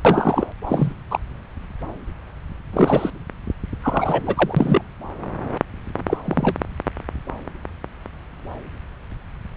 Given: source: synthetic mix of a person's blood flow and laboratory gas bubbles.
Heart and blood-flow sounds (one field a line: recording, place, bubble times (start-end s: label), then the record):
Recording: Doppler ultrasound of blood flow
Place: subclavian vein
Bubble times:
0.04-0.46 s: bubbles
0.66-0.92 s: bubbles
1.10-1.20 s: bubbles
2.73-3.10 s: bubbles
3.83-4.82 s: bubbles
6.07-6.17 s: bubbles
6.25-6.56 s: bubbles
From the record:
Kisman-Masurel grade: 222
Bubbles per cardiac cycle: several, 3 to 8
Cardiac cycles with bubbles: 10 to 50%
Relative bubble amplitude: moderate (0.250 to 0.450)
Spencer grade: 2 (many but less than half of the cardiac periods contain bubble signals, singularly or in groups)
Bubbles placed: anywhere in the cardiac cycle